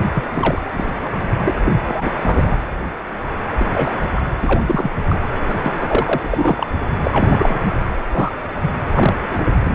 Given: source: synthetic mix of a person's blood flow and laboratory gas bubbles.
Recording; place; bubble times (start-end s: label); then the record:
Doppler ultrasound of blood flow; precordium
0.14-0.30 s: bubbles
0.34-0.61 s: bubbles
0.73-0.87 s: bubbles
1.45-1.54 s: bubbles
1.66-1.73 s: bubbles
1.84-2.10 s: bubbles
2.22-2.56 s: bubbles
3.60-3.65 s: bubbles
3.73-3.91 s: bubbles
4.16-4.21 s: bubbles
4.42-4.61 s: bubbles
4.67-4.91 s: bubbles
5.09-5.19 s: bubbles
5.50-6.19 s: bubbles
6.23-6.67 s: bubbles
7.06-7.66 s: bubbles
8.11-8.30 s: bubbles
8.62-8.68 s: bubbles
8.94-9.13 s: bubbles
9.22-9.46 s: bubbles
9.62-9.75 s: bubbles
From the record:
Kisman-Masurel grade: 233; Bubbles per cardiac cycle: several, 3 to 8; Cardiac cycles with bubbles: 50 to 99%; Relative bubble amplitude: loud (0.450 to 0.775); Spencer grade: 3 (all of the cardiac periods contain showers or single bubble signals, but not dominating or overriding the cardiac motion signals); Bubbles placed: anywhere in the cardiac cycle